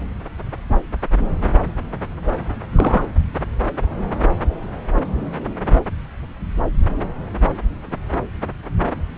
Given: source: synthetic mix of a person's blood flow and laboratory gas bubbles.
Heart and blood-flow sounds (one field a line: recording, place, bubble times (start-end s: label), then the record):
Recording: Doppler ultrasound of blood flow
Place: subclavian vein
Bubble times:
2.75-3.05 s: bubbles
From the record:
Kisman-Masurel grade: 113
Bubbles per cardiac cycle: 1 to 2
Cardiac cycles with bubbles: 1 to 10%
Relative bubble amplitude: loud (0.450 to 0.775)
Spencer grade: 1 (occasional bubble signal discernible with the cardiac motion signal, with majority of cardiac periods free of bubbles)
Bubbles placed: anywhere in the cardiac cycle